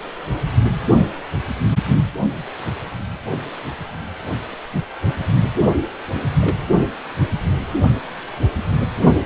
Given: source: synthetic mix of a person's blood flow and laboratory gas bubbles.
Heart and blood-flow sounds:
Doppler ultrasound of blood flow; precordium
6.06-6.19 s: bubbles
6.40-6.57 s: bubbles
From the record:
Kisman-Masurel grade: 111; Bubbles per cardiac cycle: 1 to 2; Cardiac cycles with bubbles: 1 to 10%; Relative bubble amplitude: barely perceptible (0.100 to 0.250); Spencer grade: 1 (occasional bubble signal discernible with the cardiac motion signal, with majority of cardiac periods free of bubbles); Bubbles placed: only in the low amplitude regions of the cardiac cycle

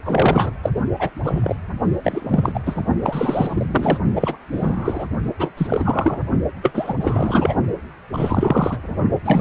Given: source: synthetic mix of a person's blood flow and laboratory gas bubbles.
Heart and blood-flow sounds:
Doppler ultrasound of blood flow; precordium
0.05-0.51 s: bubbles
0.62-0.70 s: bubbles
0.99-1.09 s: bubbles
1.23-1.56 s: bubbles
2.02-2.60 s: bubbles
2.65-2.85 s: bubbles
3.02-3.98 s: bubbles
4.15-4.38 s: bubbles
4.52-5.05 s: bubbles
5.38-5.50 s: bubbles
5.57-6.22 s: bubbles
6.62-6.95 s: bubbles
7.01-7.55 s: bubbles
8.12-8.78 s: bubbles
9.25-9.41 s: bubbles
From the record:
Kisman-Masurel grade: 343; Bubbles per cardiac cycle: rolling drumbeat, 9 or more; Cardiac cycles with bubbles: 100%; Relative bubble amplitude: loud (0.450 to 0.775); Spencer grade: 3 (all of the cardiac periods contain showers or single bubble signals, but not dominating or overriding the cardiac motion signals); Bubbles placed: only in the low amplitude regions of the cardiac cycle

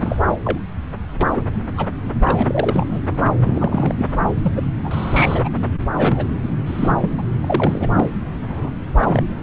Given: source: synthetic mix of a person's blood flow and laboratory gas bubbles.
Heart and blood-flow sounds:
Doppler ultrasound of blood flow; subclavian vein
0.00-0.17 s: bubbles
0.44-0.59 s: bubbles
1.21-1.32 s: bubbles
1.34-1.44 s: bubbles
1.77-1.86 s: bubbles
2.24-3.00 s: bubbles
3.43-3.94 s: bubbles
3.99-4.06 s: bubbles
4.43-4.66 s: bubbles
4.83-5.49 s: bubbles
5.96-6.25 s: bubbles
6.33-6.40 s: bubbles
6.42-6.47 s: bubbles
6.66-6.92 s: bubbles
7.00-7.10 s: bubbles
7.17-7.22 s: bubbles
7.41-8.12 s: bubbles
8.48-8.71 s: bubbles
8.99-9.23 s: bubbles
From the record:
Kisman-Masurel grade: 232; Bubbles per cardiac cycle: several, 3 to 8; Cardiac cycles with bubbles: 50 to 99%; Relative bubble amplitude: moderate (0.250 to 0.450); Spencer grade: 3 (all of the cardiac periods contain showers or single bubble signals, but not dominating or overriding the cardiac motion signals); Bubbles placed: anywhere in the cardiac cycle

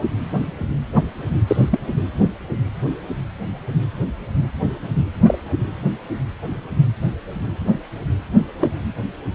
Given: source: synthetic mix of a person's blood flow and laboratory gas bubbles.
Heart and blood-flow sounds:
Doppler ultrasound of blood flow; precordium
0.95-1.02 s: bubbles
1.47-1.80 s: bubbles
5.25-5.38 s: bubbles
8.61-8.70 s: bubbles
From the record:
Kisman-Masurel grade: 123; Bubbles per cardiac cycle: 1 to 2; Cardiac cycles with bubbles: 10 to 50%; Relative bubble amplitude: loud (0.450 to 0.775); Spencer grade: 2 (many but less than half of the cardiac periods contain bubble signals, singularly or in groups); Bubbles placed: anywhere in the cardiac cycle

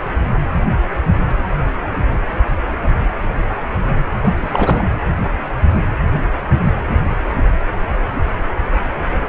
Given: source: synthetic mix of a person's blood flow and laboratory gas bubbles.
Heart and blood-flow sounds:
Doppler ultrasound of blood flow; precordium
4.21-4.84 s: bubbles
From the record:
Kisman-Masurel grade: 212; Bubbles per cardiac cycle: several, 3 to 8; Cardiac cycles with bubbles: 1 to 10%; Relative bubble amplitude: moderate (0.250 to 0.450); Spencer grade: 1 (occasional bubble signal discernible with the cardiac motion signal, with majority of cardiac periods free of bubbles); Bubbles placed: anywhere in the cardiac cycle

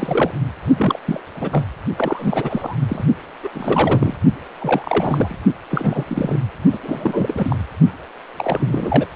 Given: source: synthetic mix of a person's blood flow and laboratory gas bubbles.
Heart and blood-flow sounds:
Doppler ultrasound of blood flow; precordium
0.00-0.31 s: bubbles
0.77-0.99 s: bubbles
1.05-1.21 s: bubbles
1.35-1.65 s: bubbles
1.96-2.76 s: bubbles
2.88-3.04 s: bubbles
3.43-3.48 s: bubbles
3.54-4.14 s: bubbles
4.59-5.40 s: bubbles
5.70-6.04 s: bubbles
6.08-6.40 s: bubbles
6.72-6.79 s: bubbles
6.83-7.56 s: bubbles
8.38-9.07 s: bubbles
From the record:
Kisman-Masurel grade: 342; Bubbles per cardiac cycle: rolling drumbeat, 9 or more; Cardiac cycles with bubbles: 100%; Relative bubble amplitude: moderate (0.250 to 0.450); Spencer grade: 3 (all of the cardiac periods contain showers or single bubble signals, but not dominating or overriding the cardiac motion signals); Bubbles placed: only in the low amplitude regions of the cardiac cycle

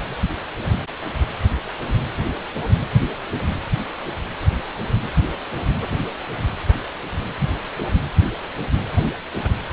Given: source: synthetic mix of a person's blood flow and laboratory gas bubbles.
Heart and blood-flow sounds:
Doppler ultrasound of blood flow; precordium
no bubbles
From the record:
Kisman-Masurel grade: 000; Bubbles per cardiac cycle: 0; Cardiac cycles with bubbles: 0%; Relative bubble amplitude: no bubbles discernible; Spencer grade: 0 (complete lack of bubble signals)

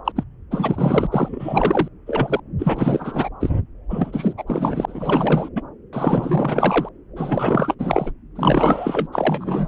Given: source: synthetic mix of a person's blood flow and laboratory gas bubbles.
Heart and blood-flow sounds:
Doppler ultrasound of blood flow; subclavian vein
0.05-0.12 s: bubbles
0.15-0.24 s: bubbles
0.51-1.07 s: bubbles
1.10-1.88 s: bubbles
2.06-2.40 s: bubbles
2.58-3.29 s: bubbles
3.40-3.50 s: bubbles
3.90-4.33 s: bubbles
4.37-4.43 s: bubbles
4.47-5.49 s: bubbles
5.55-5.62 s: bubbles
5.92-6.89 s: bubbles
7.16-7.75 s: bubbles
7.79-8.11 s: bubbles
8.35-9.08 s: bubbles
9.12-9.68 s: bubbles
From the record:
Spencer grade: 4 (maximum detectable bubble signal sounding continuously throughout systole and diastole of every cardiac period, and overriding the amplitude of the normal cardiac signals); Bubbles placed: anywhere in the cardiac cycle

